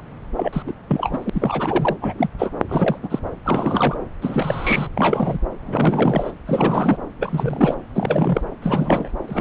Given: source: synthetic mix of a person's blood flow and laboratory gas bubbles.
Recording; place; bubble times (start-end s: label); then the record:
Doppler ultrasound of blood flow; subclavian vein
0.36-0.62 s: bubbles
0.66-0.73 s: bubbles
0.89-1.96 s: bubbles
2.01-2.14 s: bubbles
2.18-2.29 s: bubbles
2.39-2.51 s: bubbles
2.68-2.98 s: bubbles
3.02-3.20 s: bubbles
3.45-3.98 s: bubbles
4.21-4.88 s: bubbles
4.95-5.38 s: bubbles
5.65-6.32 s: bubbles
6.46-6.97 s: bubbles
7.21-7.75 s: bubbles
7.96-8.41 s: bubbles
8.62-9.11 s: bubbles
9.28-9.41 s: bubbles
From the record:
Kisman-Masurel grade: 342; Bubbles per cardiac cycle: rolling drumbeat, 9 or more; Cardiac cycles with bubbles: 100%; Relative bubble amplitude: moderate (0.250 to 0.450); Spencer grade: 3 (all of the cardiac periods contain showers or single bubble signals, but not dominating or overriding the cardiac motion signals); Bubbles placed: anywhere in the cardiac cycle